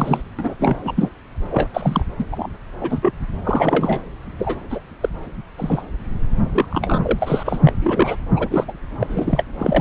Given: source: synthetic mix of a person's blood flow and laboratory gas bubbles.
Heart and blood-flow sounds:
Doppler ultrasound of blood flow; subclavian vein
0.00-0.23 s: bubbles
0.39-0.54 s: bubbles
0.59-0.77 s: bubbles
0.84-1.10 s: bubbles
1.51-1.69 s: bubbles
1.74-2.05 s: bubbles
2.18-2.25 s: bubbles
2.31-2.49 s: bubbles
2.80-2.99 s: bubbles
3.02-3.13 s: bubbles
3.44-4.01 s: bubbles
4.38-4.55 s: bubbles
4.70-4.81 s: bubbles
5.00-5.09 s: bubbles
5.58-5.85 s: bubbles
6.53-6.66 s: bubbles
6.70-7.59 s: bubbles
7.64-7.72 s: bubbles
7.79-8.17 s: bubbles
8.35-8.72 s: bubbles
9.00-9.45 s: bubbles
9.58-9.81 s: bubbles
From the record:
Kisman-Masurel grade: 243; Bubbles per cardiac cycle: several, 3 to 8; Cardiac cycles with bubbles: 100%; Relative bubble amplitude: loud (0.450 to 0.775); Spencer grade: 3 (all of the cardiac periods contain showers or single bubble signals, but not dominating or overriding the cardiac motion signals); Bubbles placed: anywhere in the cardiac cycle

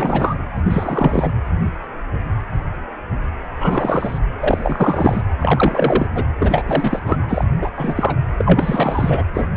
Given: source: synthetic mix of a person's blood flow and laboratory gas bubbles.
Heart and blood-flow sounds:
Doppler ultrasound of blood flow; precordium
0.00-0.36 s: bubbles
0.66-1.30 s: bubbles
3.60-4.18 s: bubbles
4.40-5.21 s: bubbles
5.39-6.07 s: bubbles
6.15-6.25 s: bubbles
6.40-7.00 s: bubbles
7.05-7.17 s: bubbles
7.28-7.45 s: bubbles
7.61-7.71 s: bubbles
7.76-8.16 s: bubbles
8.38-9.23 s: bubbles
9.34-9.48 s: bubbles
From the record:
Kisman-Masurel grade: 333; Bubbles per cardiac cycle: rolling drumbeat, 9 or more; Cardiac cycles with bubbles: 50 to 99%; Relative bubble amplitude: loud (0.450 to 0.775); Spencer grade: 3 (all of the cardiac periods contain showers or single bubble signals, but not dominating or overriding the cardiac motion signals); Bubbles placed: anywhere in the cardiac cycle

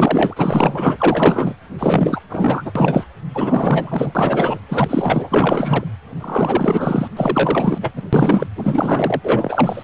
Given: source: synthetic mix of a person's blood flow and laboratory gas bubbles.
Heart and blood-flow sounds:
Doppler ultrasound of blood flow; precordium
0.00-0.34 s: bubbles
0.36-1.54 s: bubbles
1.78-2.20 s: bubbles
2.29-2.72 s: bubbles
2.75-3.05 s: bubbles
3.35-4.59 s: bubbles
4.69-5.84 s: bubbles
6.20-7.08 s: bubbles
7.17-7.78 s: bubbles
7.81-7.92 s: bubbles
7.96-8.03 s: bubbles
8.12-8.46 s: bubbles
8.55-9.21 s: bubbles
9.24-9.83 s: bubbles
From the record:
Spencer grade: 4 (maximum detectable bubble signal sounding continuously throughout systole and diastole of every cardiac period, and overriding the amplitude of the normal cardiac signals); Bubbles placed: anywhere in the cardiac cycle

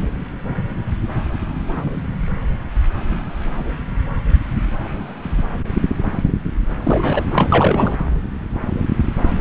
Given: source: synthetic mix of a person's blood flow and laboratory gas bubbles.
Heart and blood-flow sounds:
Doppler ultrasound of blood flow; subclavian vein
6.84-7.22 s: bubbles
7.32-7.49 s: bubbles
7.52-7.95 s: bubbles
From the record:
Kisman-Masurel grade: 223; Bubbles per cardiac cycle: several, 3 to 8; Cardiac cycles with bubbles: 10 to 50%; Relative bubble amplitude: loud (0.450 to 0.775); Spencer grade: 2 (many but less than half of the cardiac periods contain bubble signals, singularly or in groups); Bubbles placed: anywhere in the cardiac cycle

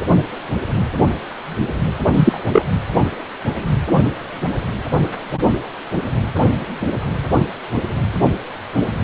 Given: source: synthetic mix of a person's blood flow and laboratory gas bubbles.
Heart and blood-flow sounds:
Doppler ultrasound of blood flow; precordium
2.14-2.40 s: bubbles
2.51-2.62 s: bubbles
From the record:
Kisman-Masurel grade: 113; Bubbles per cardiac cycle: 1 to 2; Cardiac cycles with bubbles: 1 to 10%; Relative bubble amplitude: loud (0.450 to 0.775); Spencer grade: 1 (occasional bubble signal discernible with the cardiac motion signal, with majority of cardiac periods free of bubbles); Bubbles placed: anywhere in the cardiac cycle

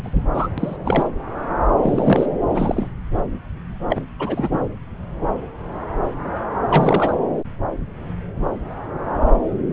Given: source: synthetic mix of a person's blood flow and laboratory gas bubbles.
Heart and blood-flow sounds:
Doppler ultrasound of blood flow; subclavian vein
0.04-0.23 s: bubbles
0.34-0.47 s: bubbles
0.57-0.77 s: bubbles
0.83-1.08 s: bubbles
1.82-2.27 s: bubbles
2.46-2.88 s: bubbles
3.89-4.01 s: bubbles
4.19-4.59 s: bubbles
6.68-7.12 s: bubbles
From the record:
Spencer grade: 2 (many but less than half of the cardiac periods contain bubble signals, singularly or in groups); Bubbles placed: anywhere in the cardiac cycle

